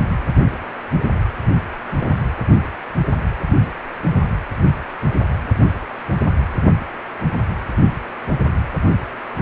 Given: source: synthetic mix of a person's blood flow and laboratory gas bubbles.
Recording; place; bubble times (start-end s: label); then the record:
Doppler ultrasound of blood flow; precordium
1.48-1.55 s: bubbles
1.99-2.14 s: bubbles
From the record:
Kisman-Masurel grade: 121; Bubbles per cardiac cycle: 1 to 2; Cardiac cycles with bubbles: 10 to 50%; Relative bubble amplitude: barely perceptible (0.100 to 0.250); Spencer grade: 2 (many but less than half of the cardiac periods contain bubble signals, singularly or in groups); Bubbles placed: anywhere in the cardiac cycle